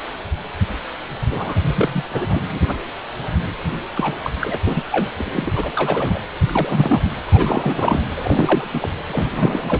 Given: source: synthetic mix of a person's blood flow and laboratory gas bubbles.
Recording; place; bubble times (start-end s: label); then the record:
Doppler ultrasound of blood flow; precordium
1.31-2.04 s: bubbles
2.12-2.60 s: bubbles
2.62-2.77 s: bubbles
3.96-4.14 s: bubbles
4.24-4.30 s: bubbles
4.40-4.58 s: bubbles
4.65-4.83 s: bubbles
4.92-5.09 s: bubbles
5.17-5.51 s: bubbles
5.55-6.20 s: bubbles
6.46-7.01 s: bubbles
7.04-7.10 s: bubbles
7.27-8.02 s: bubbles
8.16-8.89 s: bubbles
9.08-9.29 s: bubbles
9.35-9.80 s: bubbles
From the record:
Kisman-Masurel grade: 332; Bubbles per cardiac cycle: rolling drumbeat, 9 or more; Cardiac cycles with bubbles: 50 to 99%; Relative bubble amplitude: moderate (0.250 to 0.450); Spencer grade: 3 (all of the cardiac periods contain showers or single bubble signals, but not dominating or overriding the cardiac motion signals); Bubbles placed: anywhere in the cardiac cycle